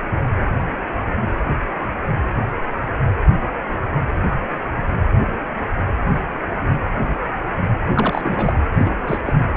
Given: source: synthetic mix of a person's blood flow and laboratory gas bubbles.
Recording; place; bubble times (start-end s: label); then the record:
Doppler ultrasound of blood flow; precordium
7.95-8.55 s: bubbles
8.76-8.90 s: bubbles
9.07-9.21 s: bubbles
9.25-9.33 s: bubbles
From the record:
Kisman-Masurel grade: 222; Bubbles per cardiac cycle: several, 3 to 8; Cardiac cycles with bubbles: 10 to 50%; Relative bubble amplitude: moderate (0.250 to 0.450); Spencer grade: 2 (many but less than half of the cardiac periods contain bubble signals, singularly or in groups); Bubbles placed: anywhere in the cardiac cycle